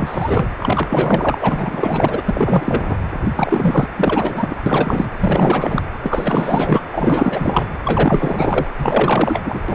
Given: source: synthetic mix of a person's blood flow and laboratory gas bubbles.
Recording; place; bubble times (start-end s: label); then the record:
Doppler ultrasound of blood flow; precordium
0.00-0.49 s: bubbles
0.60-1.38 s: bubbles
1.41-2.22 s: bubbles
2.25-2.97 s: bubbles
3.35-3.88 s: bubbles
3.96-4.56 s: bubbles
4.66-5.06 s: bubbles
5.20-5.82 s: bubbles
6.02-6.81 s: bubbles
6.91-7.66 s: bubbles
7.84-8.67 s: bubbles
8.78-9.59 s: bubbles
9.68-9.75 s: bubbles
From the record:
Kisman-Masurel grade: 444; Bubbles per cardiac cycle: continuous sound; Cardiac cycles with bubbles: 100%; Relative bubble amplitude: maximal (0.775 to 0.999); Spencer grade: 4 (maximum detectable bubble signal sounding continuously throughout systole and diastole of every cardiac period, and overriding the amplitude of the normal cardiac signals); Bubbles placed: anywhere in the cardiac cycle